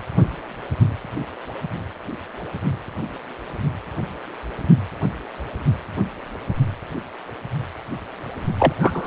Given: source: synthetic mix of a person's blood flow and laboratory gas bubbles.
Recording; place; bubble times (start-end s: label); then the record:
Doppler ultrasound of blood flow; precordium
8.59-8.73 s: bubbles
8.80-9.07 s: bubbles
From the record:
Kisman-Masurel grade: 213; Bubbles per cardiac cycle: several, 3 to 8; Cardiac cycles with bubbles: 1 to 10%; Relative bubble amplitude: loud (0.450 to 0.775); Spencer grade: 1 (occasional bubble signal discernible with the cardiac motion signal, with majority of cardiac periods free of bubbles); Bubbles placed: only in the low amplitude regions of the cardiac cycle